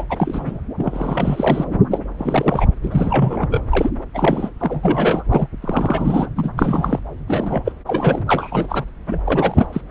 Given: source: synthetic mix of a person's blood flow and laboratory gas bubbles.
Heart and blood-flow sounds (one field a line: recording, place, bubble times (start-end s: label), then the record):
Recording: Doppler ultrasound of blood flow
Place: subclavian vein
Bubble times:
0.00-0.05 s: bubbles
0.09-0.59 s: bubbles
0.78-1.66 s: bubbles
1.91-1.99 s: bubbles
2.19-2.68 s: bubbles
2.83-2.88 s: bubbles
2.91-3.61 s: bubbles
3.70-3.90 s: bubbles
4.15-4.50 s: bubbles
4.59-5.22 s: bubbles
5.29-5.47 s: bubbles
5.61-6.26 s: bubbles
6.36-6.50 s: bubbles
6.56-7.00 s: bubbles
7.28-7.72 s: bubbles
7.87-8.22 s: bubbles
8.27-8.85 s: bubbles
9.07-9.20 s: bubbles
9.26-9.67 s: bubbles
9.72-9.81 s: bubbles
From the record:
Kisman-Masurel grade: 343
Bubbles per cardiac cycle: rolling drumbeat, 9 or more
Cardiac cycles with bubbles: 100%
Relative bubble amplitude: loud (0.450 to 0.775)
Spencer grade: 3 (all of the cardiac periods contain showers or single bubble signals, but not dominating or overriding the cardiac motion signals)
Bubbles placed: anywhere in the cardiac cycle